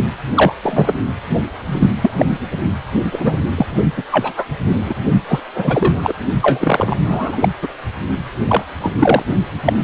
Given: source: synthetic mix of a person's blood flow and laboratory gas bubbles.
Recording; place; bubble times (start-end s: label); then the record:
Doppler ultrasound of blood flow; precordium
0.35-0.52 s: bubbles
0.62-0.93 s: bubbles
1.66-1.91 s: bubbles
2.01-2.10 s: bubbles
2.19-2.39 s: bubbles
3.12-3.40 s: bubbles
3.58-3.66 s: bubbles
3.96-4.03 s: bubbles
4.11-4.33 s: bubbles
4.37-4.46 s: bubbles
4.67-4.93 s: bubbles
5.28-5.40 s: bubbles
5.55-6.13 s: bubbles
6.42-7.37 s: bubbles
7.39-7.48 s: bubbles
7.62-7.67 s: bubbles
8.47-8.63 s: bubbles
8.80-8.91 s: bubbles
8.98-9.22 s: bubbles
9.65-9.73 s: bubbles
From the record:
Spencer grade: 3 (all of the cardiac periods contain showers or single bubble signals, but not dominating or overriding the cardiac motion signals); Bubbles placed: only in the low amplitude regions of the cardiac cycle